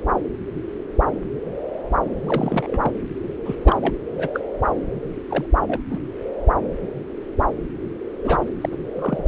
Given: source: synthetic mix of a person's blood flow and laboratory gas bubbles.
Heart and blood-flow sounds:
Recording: Doppler ultrasound of blood flow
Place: subclavian vein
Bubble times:
2.27-2.92 s: bubbles
3.45-3.56 s: bubbles
3.64-3.76 s: bubbles
3.80-3.94 s: bubbles
4.18-4.29 s: bubbles
4.33-4.40 s: bubbles
5.29-5.46 s: bubbles
5.67-5.83 s: bubbles
5.90-5.99 s: bubbles
8.24-8.40 s: bubbles
8.61-8.69 s: bubbles
8.71-8.75 s: bubbles
8.96-9.22 s: bubbles
From the record:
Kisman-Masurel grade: 222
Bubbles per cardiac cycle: several, 3 to 8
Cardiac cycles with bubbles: 10 to 50%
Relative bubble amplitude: moderate (0.250 to 0.450)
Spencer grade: 2 (many but less than half of the cardiac periods contain bubble signals, singularly or in groups)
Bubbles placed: anywhere in the cardiac cycle

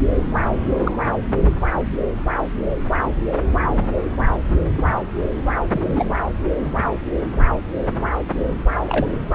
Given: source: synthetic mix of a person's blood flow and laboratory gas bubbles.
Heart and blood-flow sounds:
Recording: Doppler ultrasound of blood flow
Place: subclavian vein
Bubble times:
0.78-0.92 s: bubbles
4.75-4.84 s: bubbles
5.70-6.14 s: bubbles
8.88-9.06 s: bubbles
From the record:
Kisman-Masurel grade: 122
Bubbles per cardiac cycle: 1 to 2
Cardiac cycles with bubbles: 10 to 50%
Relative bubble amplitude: moderate (0.250 to 0.450)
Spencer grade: 2 (many but less than half of the cardiac periods contain bubble signals, singularly or in groups)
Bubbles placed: anywhere in the cardiac cycle

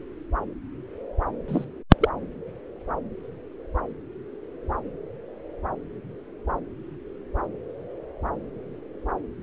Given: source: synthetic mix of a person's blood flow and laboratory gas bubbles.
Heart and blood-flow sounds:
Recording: Doppler ultrasound of blood flow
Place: subclavian vein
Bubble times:
1.48-1.65 s: bubbles
2.00-2.09 s: bubbles
From the record:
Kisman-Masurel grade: 112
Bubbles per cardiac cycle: 1 to 2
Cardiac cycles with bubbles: 1 to 10%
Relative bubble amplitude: moderate (0.250 to 0.450)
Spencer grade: 1 (occasional bubble signal discernible with the cardiac motion signal, with majority of cardiac periods free of bubbles)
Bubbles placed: anywhere in the cardiac cycle

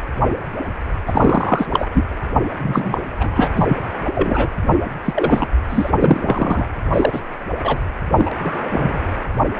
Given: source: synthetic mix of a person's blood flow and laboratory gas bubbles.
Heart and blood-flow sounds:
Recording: Doppler ultrasound of blood flow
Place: precordium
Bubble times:
1.07-1.66 s: bubbles
1.72-1.89 s: bubbles
1.93-2.04 s: bubbles
2.58-3.02 s: bubbles
3.20-3.49 s: bubbles
3.56-3.78 s: bubbles
4.14-4.50 s: bubbles
5.04-5.47 s: bubbles
5.69-5.90 s: bubbles
6.00-6.66 s: bubbles
6.93-7.21 s: bubbles
7.62-7.79 s: bubbles
8.16-8.30 s: bubbles
8.38-9.00 s: bubbles
From the record:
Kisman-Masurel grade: 233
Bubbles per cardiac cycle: several, 3 to 8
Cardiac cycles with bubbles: 50 to 99%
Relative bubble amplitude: loud (0.450 to 0.775)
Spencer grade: 3 (all of the cardiac periods contain showers or single bubble signals, but not dominating or overriding the cardiac motion signals)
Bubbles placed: anywhere in the cardiac cycle

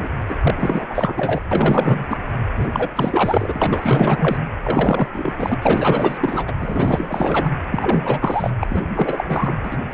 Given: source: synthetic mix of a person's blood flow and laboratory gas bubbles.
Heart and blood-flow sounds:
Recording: Doppler ultrasound of blood flow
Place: precordium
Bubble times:
0.00-0.10 s: bubbles
0.28-0.37 s: bubbles
0.42-0.86 s: bubbles
0.89-1.41 s: bubbles
1.51-2.06 s: bubbles
2.09-2.17 s: bubbles
2.56-2.69 s: bubbles
2.72-2.89 s: bubbles
2.95-4.37 s: bubbles
4.63-5.07 s: bubbles
5.12-5.58 s: bubbles
5.62-6.53 s: bubbles
6.59-7.50 s: bubbles
7.71-8.52 s: bubbles
8.61-8.67 s: bubbles
8.70-8.83 s: bubbles
8.95-9.25 s: bubbles
9.28-9.55 s: bubbles
9.64-9.78 s: bubbles
9.91-9.94 s: bubbles
From the record:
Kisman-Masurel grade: 444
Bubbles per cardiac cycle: continuous sound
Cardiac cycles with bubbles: 100%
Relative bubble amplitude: maximal (0.775 to 0.999)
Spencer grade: 4 (maximum detectable bubble signal sounding continuously throughout systole and diastole of every cardiac period, and overriding the amplitude of the normal cardiac signals)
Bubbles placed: anywhere in the cardiac cycle

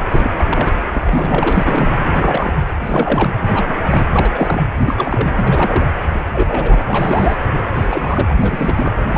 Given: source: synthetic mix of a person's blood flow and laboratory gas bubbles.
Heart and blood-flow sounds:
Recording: Doppler ultrasound of blood flow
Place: precordium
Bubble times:
0.10-0.31 s: bubbles
0.38-0.44 s: bubbles
0.47-0.70 s: bubbles
0.92-1.99 s: bubbles
2.12-2.53 s: bubbles
2.81-3.31 s: bubbles
3.48-3.79 s: bubbles
3.85-4.04 s: bubbles
4.15-4.63 s: bubbles
4.76-5.29 s: bubbles
5.37-5.90 s: bubbles
6.13-6.23 s: bubbles
6.33-6.82 s: bubbles
6.86-7.36 s: bubbles
7.74-8.36 s: bubbles
8.41-8.91 s: bubbles
9.10-9.18 s: bubbles
From the record:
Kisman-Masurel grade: 342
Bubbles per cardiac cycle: rolling drumbeat, 9 or more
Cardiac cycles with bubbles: 100%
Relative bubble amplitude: moderate (0.250 to 0.450)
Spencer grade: 3 (all of the cardiac periods contain showers or single bubble signals, but not dominating or overriding the cardiac motion signals)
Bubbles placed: anywhere in the cardiac cycle

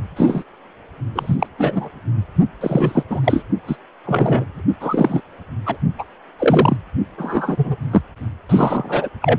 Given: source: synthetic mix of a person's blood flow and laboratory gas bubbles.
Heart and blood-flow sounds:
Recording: Doppler ultrasound of blood flow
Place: precordium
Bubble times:
0.16-0.43 s: bubbles
1.15-1.36 s: bubbles
1.39-1.47 s: bubbles
1.58-1.89 s: bubbles
2.61-3.03 s: bubbles
3.09-3.20 s: bubbles
3.24-3.43 s: bubbles
3.68-3.76 s: bubbles
4.06-4.62 s: bubbles
4.80-5.21 s: bubbles
5.65-5.77 s: bubbles
5.99-6.04 s: bubbles
6.39-6.77 s: bubbles
7.18-7.76 s: bubbles
7.91-8.02 s: bubbles
8.49-9.09 s: bubbles
9.21-9.39 s: bubbles
From the record:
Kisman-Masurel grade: 243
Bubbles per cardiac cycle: several, 3 to 8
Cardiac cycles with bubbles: 100%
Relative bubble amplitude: loud (0.450 to 0.775)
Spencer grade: 3 (all of the cardiac periods contain showers or single bubble signals, but not dominating or overriding the cardiac motion signals)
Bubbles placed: only in the low amplitude regions of the cardiac cycle

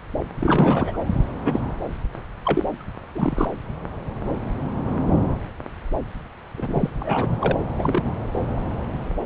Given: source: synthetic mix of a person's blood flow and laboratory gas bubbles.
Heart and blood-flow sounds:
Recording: Doppler ultrasound of blood flow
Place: subclavian vein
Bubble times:
0.39-0.98 s: bubbles
1.45-1.61 s: bubbles
2.44-2.63 s: bubbles
3.15-3.47 s: bubbles
6.57-6.90 s: bubbles
6.99-7.59 s: bubbles
7.78-8.12 s: bubbles
From the record:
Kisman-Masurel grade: 232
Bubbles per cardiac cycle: several, 3 to 8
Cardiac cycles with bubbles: 50 to 99%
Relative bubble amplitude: moderate (0.250 to 0.450)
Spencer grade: 3 (all of the cardiac periods contain showers or single bubble signals, but not dominating or overriding the cardiac motion signals)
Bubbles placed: anywhere in the cardiac cycle

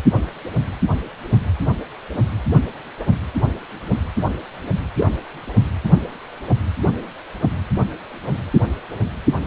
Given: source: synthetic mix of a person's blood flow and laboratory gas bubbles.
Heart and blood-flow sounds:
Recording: Doppler ultrasound of blood flow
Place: precordium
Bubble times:
4.96-5.12 s: bubbles
From the record:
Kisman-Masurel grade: 112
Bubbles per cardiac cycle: 1 to 2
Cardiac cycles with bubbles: 1 to 10%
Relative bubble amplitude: moderate (0.250 to 0.450)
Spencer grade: 1 (occasional bubble signal discernible with the cardiac motion signal, with majority of cardiac periods free of bubbles)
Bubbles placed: anywhere in the cardiac cycle

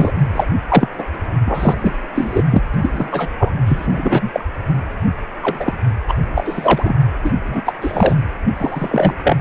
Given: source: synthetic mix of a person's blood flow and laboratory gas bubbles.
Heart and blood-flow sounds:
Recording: Doppler ultrasound of blood flow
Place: precordium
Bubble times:
0.00-0.11 s: bubbles
0.34-0.45 s: bubbles
0.69-0.89 s: bubbles
0.98-1.04 s: bubbles
1.45-1.97 s: bubbles
2.15-2.43 s: bubbles
2.50-2.63 s: bubbles
2.74-3.29 s: bubbles
3.38-3.53 s: bubbles
3.65-4.30 s: bubbles
4.33-4.44 s: bubbles
5.43-5.74 s: bubbles
6.08-6.13 s: bubbles
6.35-6.96 s: bubbles
7.23-7.31 s: bubbles
7.48-7.61 s: bubbles
7.65-7.74 s: bubbles
7.80-8.16 s: bubbles
8.57-9.14 s: bubbles
9.23-9.37 s: bubbles
From the record:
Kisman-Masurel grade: 243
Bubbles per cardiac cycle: several, 3 to 8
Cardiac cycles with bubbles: 100%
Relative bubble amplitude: loud (0.450 to 0.775)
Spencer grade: 3 (all of the cardiac periods contain showers or single bubble signals, but not dominating or overriding the cardiac motion signals)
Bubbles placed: anywhere in the cardiac cycle

